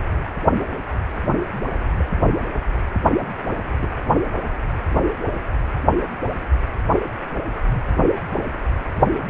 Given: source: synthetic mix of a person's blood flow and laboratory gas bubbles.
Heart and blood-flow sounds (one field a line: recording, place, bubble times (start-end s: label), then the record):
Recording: Doppler ultrasound of blood flow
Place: precordium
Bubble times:
2.00-2.04 s: bubbles
3.70-3.94 s: bubbles
From the record:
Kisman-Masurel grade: 121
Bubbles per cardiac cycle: 1 to 2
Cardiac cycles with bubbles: 10 to 50%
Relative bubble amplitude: barely perceptible (0.100 to 0.250)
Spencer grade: 2 (many but less than half of the cardiac periods contain bubble signals, singularly or in groups)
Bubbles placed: anywhere in the cardiac cycle